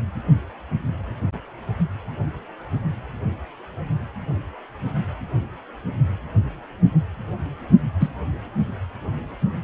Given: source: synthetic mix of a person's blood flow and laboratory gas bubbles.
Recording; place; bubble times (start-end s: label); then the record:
Doppler ultrasound of blood flow; precordium
8.00-8.09 s: bubbles
From the record:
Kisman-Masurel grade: 113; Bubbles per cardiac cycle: 1 to 2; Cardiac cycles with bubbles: 1 to 10%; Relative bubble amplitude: loud (0.450 to 0.775); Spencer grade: 1 (occasional bubble signal discernible with the cardiac motion signal, with majority of cardiac periods free of bubbles); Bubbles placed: only in the low amplitude regions of the cardiac cycle